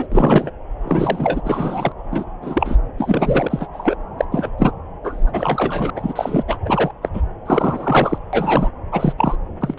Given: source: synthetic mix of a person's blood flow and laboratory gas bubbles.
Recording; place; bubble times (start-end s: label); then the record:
Doppler ultrasound of blood flow; subclavian vein
0.00-0.07 s: bubbles
0.11-0.51 s: bubbles
0.84-1.41 s: bubbles
1.44-1.92 s: bubbles
2.11-2.25 s: bubbles
2.42-2.77 s: bubbles
2.98-3.67 s: bubbles
3.73-3.95 s: bubbles
4.18-4.25 s: bubbles
4.32-4.50 s: bubbles
4.58-4.72 s: bubbles
5.04-5.91 s: bubbles
5.96-6.44 s: bubbles
6.48-6.58 s: bubbles
6.65-6.91 s: bubbles
7.02-7.10 s: bubbles
7.14-7.22 s: bubbles
7.46-8.18 s: bubbles
8.33-8.69 s: bubbles
8.92-9.13 s: bubbles
9.17-9.37 s: bubbles
9.60-9.75 s: bubbles
From the record:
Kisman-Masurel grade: 243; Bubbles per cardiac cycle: several, 3 to 8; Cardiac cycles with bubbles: 100%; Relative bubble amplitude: loud (0.450 to 0.775); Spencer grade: 3 (all of the cardiac periods contain showers or single bubble signals, but not dominating or overriding the cardiac motion signals); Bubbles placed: anywhere in the cardiac cycle